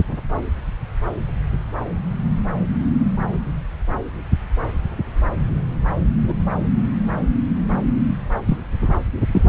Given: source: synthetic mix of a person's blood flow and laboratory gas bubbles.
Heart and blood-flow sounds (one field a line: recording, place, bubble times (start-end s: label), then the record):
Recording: Doppler ultrasound of blood flow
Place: subclavian vein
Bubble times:
6.27-6.33 s: bubbles
8.46-8.58 s: bubbles
9.33-9.42 s: bubbles
From the record:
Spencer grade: 2 (many but less than half of the cardiac periods contain bubble signals, singularly or in groups)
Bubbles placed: anywhere in the cardiac cycle